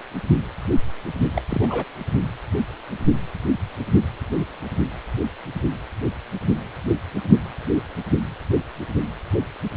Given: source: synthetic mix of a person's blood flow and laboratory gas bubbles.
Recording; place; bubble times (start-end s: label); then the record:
Doppler ultrasound of blood flow; precordium
1.34-1.42 s: bubbles
1.50-1.84 s: bubbles
From the record:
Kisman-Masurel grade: 211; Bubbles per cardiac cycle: several, 3 to 8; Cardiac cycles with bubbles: 1 to 10%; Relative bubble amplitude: barely perceptible (0.100 to 0.250); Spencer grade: 1 (occasional bubble signal discernible with the cardiac motion signal, with majority of cardiac periods free of bubbles); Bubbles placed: only in the low amplitude regions of the cardiac cycle